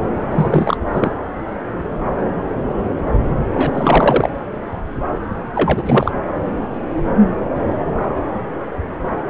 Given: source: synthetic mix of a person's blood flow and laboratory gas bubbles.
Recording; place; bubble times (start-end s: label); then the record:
Doppler ultrasound of blood flow; subclavian vein
0.31-0.77 s: bubbles
0.92-1.10 s: bubbles
3.53-4.29 s: bubbles
5.55-5.83 s: bubbles
5.85-6.12 s: bubbles
From the record:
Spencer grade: 2 (many but less than half of the cardiac periods contain bubble signals, singularly or in groups); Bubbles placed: anywhere in the cardiac cycle